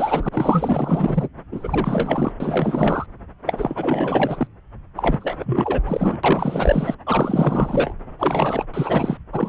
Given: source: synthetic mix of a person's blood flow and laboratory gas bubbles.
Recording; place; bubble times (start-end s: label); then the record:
Doppler ultrasound of blood flow; subclavian vein
0.00-0.29 s: bubbles
0.32-1.29 s: bubbles
1.52-2.32 s: bubbles
2.40-3.06 s: bubbles
3.46-4.47 s: bubbles
4.96-5.81 s: bubbles
5.85-6.18 s: bubbles
6.23-6.95 s: bubbles
7.06-7.94 s: bubbles
8.19-8.64 s: bubbles
8.74-9.18 s: bubbles
9.32-9.49 s: bubbles
From the record:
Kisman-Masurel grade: 444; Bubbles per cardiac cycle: continuous sound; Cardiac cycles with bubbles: 100%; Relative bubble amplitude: maximal (0.775 to 0.999); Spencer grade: 4 (maximum detectable bubble signal sounding continuously throughout systole and diastole of every cardiac period, and overriding the amplitude of the normal cardiac signals); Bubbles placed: anywhere in the cardiac cycle